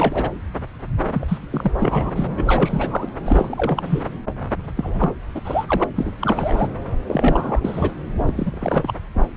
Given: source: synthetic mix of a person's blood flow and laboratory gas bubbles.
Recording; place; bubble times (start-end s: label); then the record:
Doppler ultrasound of blood flow; subclavian vein
0.00-0.30 s: bubbles
1.12-1.38 s: bubbles
1.50-1.72 s: bubbles
1.78-2.10 s: bubbles
2.15-2.27 s: bubbles
2.36-3.09 s: bubbles
3.25-4.02 s: bubbles
4.75-5.14 s: bubbles
5.34-5.41 s: bubbles
5.45-5.84 s: bubbles
5.95-6.13 s: bubbles
6.21-6.68 s: bubbles
7.08-7.92 s: bubbles
8.27-8.34 s: bubbles
8.37-8.93 s: bubbles
From the record:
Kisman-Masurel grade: 342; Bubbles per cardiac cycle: rolling drumbeat, 9 or more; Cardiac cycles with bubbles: 100%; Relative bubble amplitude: moderate (0.250 to 0.450); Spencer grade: 3 (all of the cardiac periods contain showers or single bubble signals, but not dominating or overriding the cardiac motion signals); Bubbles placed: anywhere in the cardiac cycle